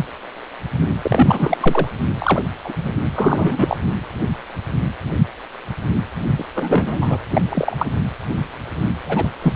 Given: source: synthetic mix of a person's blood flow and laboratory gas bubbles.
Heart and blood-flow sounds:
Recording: Doppler ultrasound of blood flow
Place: precordium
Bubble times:
1.02-1.58 s: bubbles
1.60-1.88 s: bubbles
2.19-2.42 s: bubbles
2.64-2.73 s: bubbles
2.84-2.90 s: bubbles
3.16-3.77 s: bubbles
6.38-6.44 s: bubbles
6.54-7.17 s: bubbles
7.33-7.42 s: bubbles
7.50-7.86 s: bubbles
9.05-9.28 s: bubbles
9.42-9.53 s: bubbles
From the record:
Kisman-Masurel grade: 233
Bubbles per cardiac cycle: several, 3 to 8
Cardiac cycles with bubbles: 50 to 99%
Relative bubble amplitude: loud (0.450 to 0.775)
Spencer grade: 3 (all of the cardiac periods contain showers or single bubble signals, but not dominating or overriding the cardiac motion signals)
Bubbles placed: anywhere in the cardiac cycle

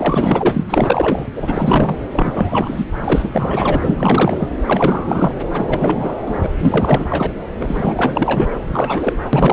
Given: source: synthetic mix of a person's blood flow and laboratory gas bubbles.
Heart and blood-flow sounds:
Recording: Doppler ultrasound of blood flow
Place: subclavian vein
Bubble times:
0.00-0.64 s: bubbles
0.69-1.27 s: bubbles
1.34-1.97 s: bubbles
2.12-2.85 s: bubbles
3.02-3.30 s: bubbles
3.33-4.49 s: bubbles
4.66-5.34 s: bubbles
5.52-6.17 s: bubbles
6.25-6.46 s: bubbles
6.58-7.05 s: bubbles
7.09-7.33 s: bubbles
7.59-8.48 s: bubbles
8.62-9.16 s: bubbles
9.22-9.30 s: bubbles
9.33-9.53 s: bubbles
From the record:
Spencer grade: 4 (maximum detectable bubble signal sounding continuously throughout systole and diastole of every cardiac period, and overriding the amplitude of the normal cardiac signals)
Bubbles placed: anywhere in the cardiac cycle

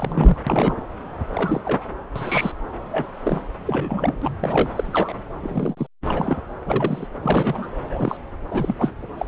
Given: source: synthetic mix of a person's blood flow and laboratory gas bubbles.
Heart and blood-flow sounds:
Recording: Doppler ultrasound of blood flow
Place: subclavian vein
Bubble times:
0.00-0.38 s: bubbles
0.47-0.81 s: bubbles
1.34-1.60 s: bubbles
1.65-1.87 s: bubbles
2.16-2.52 s: bubbles
2.92-3.06 s: bubbles
3.23-3.42 s: bubbles
3.66-4.36 s: bubbles
4.40-4.69 s: bubbles
4.75-5.17 s: bubbles
5.42-5.87 s: bubbles
6.05-6.42 s: bubbles
6.66-7.08 s: bubbles
7.22-7.71 s: bubbles
7.89-8.17 s: bubbles
8.51-8.76 s: bubbles
8.79-8.90 s: bubbles
9.18-9.26 s: bubbles
From the record:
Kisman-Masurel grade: 242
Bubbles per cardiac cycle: several, 3 to 8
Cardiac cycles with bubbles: 100%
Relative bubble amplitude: moderate (0.250 to 0.450)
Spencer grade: 3 (all of the cardiac periods contain showers or single bubble signals, but not dominating or overriding the cardiac motion signals)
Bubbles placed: anywhere in the cardiac cycle

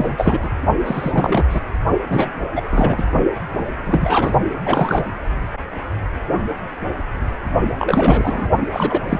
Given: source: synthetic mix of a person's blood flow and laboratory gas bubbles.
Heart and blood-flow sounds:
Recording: Doppler ultrasound of blood flow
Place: precordium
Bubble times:
0.00-0.49 s: bubbles
0.86-1.45 s: bubbles
1.50-1.60 s: bubbles
2.08-2.30 s: bubbles
2.55-2.61 s: bubbles
2.71-3.03 s: bubbles
3.86-4.33 s: bubbles
4.66-5.04 s: bubbles
7.79-8.47 s: bubbles
8.60-8.66 s: bubbles
8.71-9.01 s: bubbles
9.09-9.20 s: bubbles
From the record:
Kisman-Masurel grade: 333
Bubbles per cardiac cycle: rolling drumbeat, 9 or more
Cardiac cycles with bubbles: 50 to 99%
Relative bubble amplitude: loud (0.450 to 0.775)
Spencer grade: 3 (all of the cardiac periods contain showers or single bubble signals, but not dominating or overriding the cardiac motion signals)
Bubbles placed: only in the low amplitude regions of the cardiac cycle

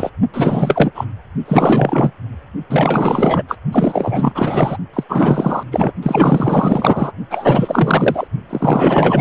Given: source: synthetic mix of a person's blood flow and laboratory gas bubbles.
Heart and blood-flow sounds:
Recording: Doppler ultrasound of blood flow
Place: precordium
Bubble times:
0.00-0.10 s: bubbles
0.34-0.92 s: bubbles
0.95-1.05 s: bubbles
1.45-2.11 s: bubbles
2.70-3.43 s: bubbles
3.48-3.57 s: bubbles
3.72-4.77 s: bubbles
4.93-5.04 s: bubbles
5.08-5.63 s: bubbles
5.71-5.92 s: bubbles
6.03-7.12 s: bubbles
7.30-8.27 s: bubbles
8.49-9.21 s: bubbles
From the record:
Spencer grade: 4 (maximum detectable bubble signal sounding continuously throughout systole and diastole of every cardiac period, and overriding the amplitude of the normal cardiac signals)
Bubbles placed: only in the low amplitude regions of the cardiac cycle

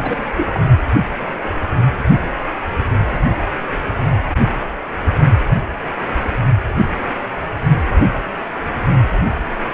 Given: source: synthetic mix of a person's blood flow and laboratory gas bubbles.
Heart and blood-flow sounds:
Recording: Doppler ultrasound of blood flow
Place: precordium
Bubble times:
0.00-0.23 s: bubbles
0.36-0.61 s: bubbles
From the record:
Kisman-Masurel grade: 221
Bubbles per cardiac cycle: several, 3 to 8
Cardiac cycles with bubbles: 10 to 50%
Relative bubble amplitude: barely perceptible (0.100 to 0.250)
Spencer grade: 2 (many but less than half of the cardiac periods contain bubble signals, singularly or in groups)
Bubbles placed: only in the low amplitude regions of the cardiac cycle

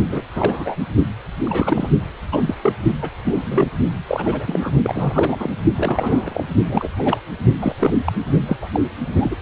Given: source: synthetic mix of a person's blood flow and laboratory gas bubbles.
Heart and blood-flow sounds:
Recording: Doppler ultrasound of blood flow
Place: precordium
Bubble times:
0.09-0.22 s: bubbles
0.35-0.76 s: bubbles
1.46-1.90 s: bubbles
2.32-2.54 s: bubbles
2.62-2.73 s: bubbles
3.01-3.09 s: bubbles
3.24-3.41 s: bubbles
3.43-3.68 s: bubbles
4.07-4.69 s: bubbles
4.83-5.50 s: bubbles
5.76-6.44 s: bubbles
6.68-6.88 s: bubbles
6.97-7.21 s: bubbles
7.62-7.75 s: bubbles
7.79-7.94 s: bubbles
8.06-8.12 s: bubbles
8.47-8.57 s: bubbles
8.62-8.70 s: bubbles
8.72-8.80 s: bubbles
9.16-9.37 s: bubbles
From the record:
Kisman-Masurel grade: 242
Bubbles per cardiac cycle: several, 3 to 8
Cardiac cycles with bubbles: 100%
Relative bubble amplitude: moderate (0.250 to 0.450)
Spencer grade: 3 (all of the cardiac periods contain showers or single bubble signals, but not dominating or overriding the cardiac motion signals)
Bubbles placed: only in the low amplitude regions of the cardiac cycle

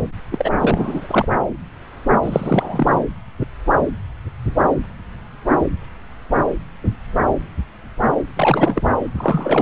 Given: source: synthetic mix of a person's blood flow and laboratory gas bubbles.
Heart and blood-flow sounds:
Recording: Doppler ultrasound of blood flow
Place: subclavian vein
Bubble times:
0.31-0.52 s: bubbles
0.58-1.26 s: bubbles
2.23-2.98 s: bubbles
8.36-8.82 s: bubbles
9.18-9.62 s: bubbles
From the record:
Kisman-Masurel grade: 333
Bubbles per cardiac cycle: rolling drumbeat, 9 or more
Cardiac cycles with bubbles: 50 to 99%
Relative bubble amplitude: loud (0.450 to 0.775)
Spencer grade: 3 (all of the cardiac periods contain showers or single bubble signals, but not dominating or overriding the cardiac motion signals)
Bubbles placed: anywhere in the cardiac cycle

